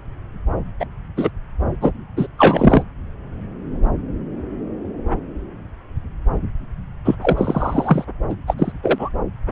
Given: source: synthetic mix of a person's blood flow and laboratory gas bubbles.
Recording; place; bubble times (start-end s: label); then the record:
Doppler ultrasound of blood flow; subclavian vein
0.79-0.85 s: bubbles
1.17-1.30 s: bubbles
1.80-1.92 s: bubbles
2.17-2.27 s: bubbles
2.38-2.83 s: bubbles
7.04-7.15 s: bubbles
7.21-8.04 s: bubbles
8.29-8.35 s: bubbles
8.47-8.54 s: bubbles
8.58-8.72 s: bubbles
8.83-9.09 s: bubbles
From the record:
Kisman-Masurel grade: 223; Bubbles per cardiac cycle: several, 3 to 8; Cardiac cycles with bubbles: 10 to 50%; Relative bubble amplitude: loud (0.450 to 0.775); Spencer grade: 2 (many but less than half of the cardiac periods contain bubble signals, singularly or in groups); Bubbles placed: anywhere in the cardiac cycle